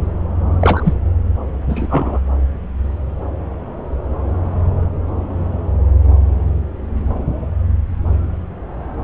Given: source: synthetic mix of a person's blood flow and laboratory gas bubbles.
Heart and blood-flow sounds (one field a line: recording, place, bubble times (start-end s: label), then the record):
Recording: Doppler ultrasound of blood flow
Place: subclavian vein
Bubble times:
0.60-0.93 s: bubbles
1.69-2.20 s: bubbles
From the record:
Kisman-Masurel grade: 223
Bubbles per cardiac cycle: several, 3 to 8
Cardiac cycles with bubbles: 10 to 50%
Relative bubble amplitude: loud (0.450 to 0.775)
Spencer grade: 2 (many but less than half of the cardiac periods contain bubble signals, singularly or in groups)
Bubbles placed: anywhere in the cardiac cycle